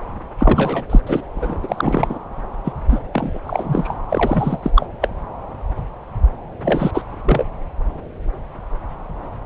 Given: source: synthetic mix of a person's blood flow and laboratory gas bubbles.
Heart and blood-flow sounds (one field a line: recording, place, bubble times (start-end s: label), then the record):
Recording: Doppler ultrasound of blood flow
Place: subclavian vein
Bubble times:
0.40-0.84 s: bubbles
0.89-1.00 s: bubbles
1.06-1.23 s: bubbles
1.35-2.19 s: bubbles
2.65-2.73 s: bubbles
2.88-2.99 s: bubbles
3.12-3.38 s: bubbles
3.46-3.95 s: bubbles
4.10-4.71 s: bubbles
4.75-4.86 s: bubbles
5.01-5.08 s: bubbles
6.62-6.91 s: bubbles
6.94-7.02 s: bubbles
7.11-7.46 s: bubbles
From the record:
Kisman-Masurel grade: 333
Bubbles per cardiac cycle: rolling drumbeat, 9 or more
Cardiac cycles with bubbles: 50 to 99%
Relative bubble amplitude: loud (0.450 to 0.775)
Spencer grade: 3 (all of the cardiac periods contain showers or single bubble signals, but not dominating or overriding the cardiac motion signals)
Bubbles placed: anywhere in the cardiac cycle